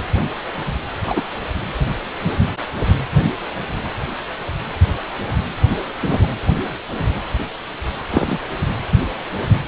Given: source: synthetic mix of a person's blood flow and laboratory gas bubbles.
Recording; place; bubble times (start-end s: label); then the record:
Doppler ultrasound of blood flow; precordium
1.05-1.21 s: bubbles
6.03-6.27 s: bubbles
8.10-8.39 s: bubbles
From the record:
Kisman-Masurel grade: 123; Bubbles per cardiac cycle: 1 to 2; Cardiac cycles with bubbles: 10 to 50%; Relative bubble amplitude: loud (0.450 to 0.775); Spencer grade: 2 (many but less than half of the cardiac periods contain bubble signals, singularly or in groups); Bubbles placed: anywhere in the cardiac cycle